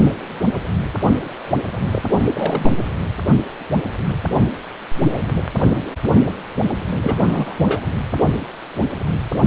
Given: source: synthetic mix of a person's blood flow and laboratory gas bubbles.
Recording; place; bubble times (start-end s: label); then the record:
Doppler ultrasound of blood flow; precordium
1.92-2.02 s: bubbles
2.33-2.73 s: bubbles
7.03-7.54 s: bubbles
7.58-7.80 s: bubbles
From the record:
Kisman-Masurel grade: 222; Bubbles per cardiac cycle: several, 3 to 8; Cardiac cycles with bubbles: 10 to 50%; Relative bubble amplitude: moderate (0.250 to 0.450); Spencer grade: 2 (many but less than half of the cardiac periods contain bubble signals, singularly or in groups); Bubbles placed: anywhere in the cardiac cycle